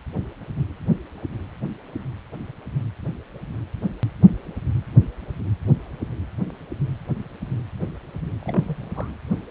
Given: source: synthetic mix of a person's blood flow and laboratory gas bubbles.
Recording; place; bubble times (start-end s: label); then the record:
Doppler ultrasound of blood flow; precordium
8.39-9.08 s: bubbles
From the record:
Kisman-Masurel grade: 211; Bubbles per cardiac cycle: several, 3 to 8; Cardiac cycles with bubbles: 1 to 10%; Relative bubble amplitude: barely perceptible (0.100 to 0.250); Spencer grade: 1 (occasional bubble signal discernible with the cardiac motion signal, with majority of cardiac periods free of bubbles); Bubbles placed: anywhere in the cardiac cycle